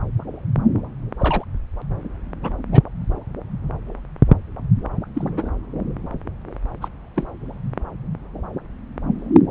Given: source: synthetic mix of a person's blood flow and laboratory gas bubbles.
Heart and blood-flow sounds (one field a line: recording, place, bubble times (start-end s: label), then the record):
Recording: Doppler ultrasound of blood flow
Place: subclavian vein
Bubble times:
1.19-1.45 s: bubbles
2.42-2.52 s: bubbles
2.72-2.82 s: bubbles
5.14-5.50 s: bubbles
6.81-6.88 s: bubbles
7.16-7.27 s: bubbles
From the record:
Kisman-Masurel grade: 122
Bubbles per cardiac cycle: 1 to 2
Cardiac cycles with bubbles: 10 to 50%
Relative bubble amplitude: moderate (0.250 to 0.450)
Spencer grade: 2 (many but less than half of the cardiac periods contain bubble signals, singularly or in groups)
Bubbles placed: anywhere in the cardiac cycle